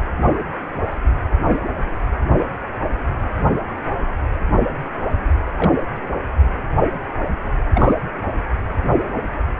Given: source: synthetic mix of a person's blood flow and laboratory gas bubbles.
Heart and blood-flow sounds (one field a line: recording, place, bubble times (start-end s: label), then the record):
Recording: Doppler ultrasound of blood flow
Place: precordium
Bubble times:
5.56-5.74 s: bubbles
7.74-7.94 s: bubbles
From the record:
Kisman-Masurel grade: 122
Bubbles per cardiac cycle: 1 to 2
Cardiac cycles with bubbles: 10 to 50%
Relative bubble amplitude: moderate (0.250 to 0.450)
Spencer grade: 2 (many but less than half of the cardiac periods contain bubble signals, singularly or in groups)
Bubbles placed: anywhere in the cardiac cycle